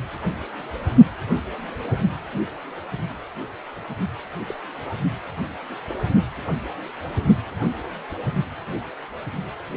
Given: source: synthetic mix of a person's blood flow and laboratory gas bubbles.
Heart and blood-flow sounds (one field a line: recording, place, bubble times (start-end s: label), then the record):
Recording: Doppler ultrasound of blood flow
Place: precordium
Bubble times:
4.48-4.60 s: bubbles
4.82-4.96 s: bubbles
From the record:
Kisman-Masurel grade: 111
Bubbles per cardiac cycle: 1 to 2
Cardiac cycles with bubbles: 1 to 10%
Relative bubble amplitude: barely perceptible (0.100 to 0.250)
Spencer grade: 1 (occasional bubble signal discernible with the cardiac motion signal, with majority of cardiac periods free of bubbles)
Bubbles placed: only in the low amplitude regions of the cardiac cycle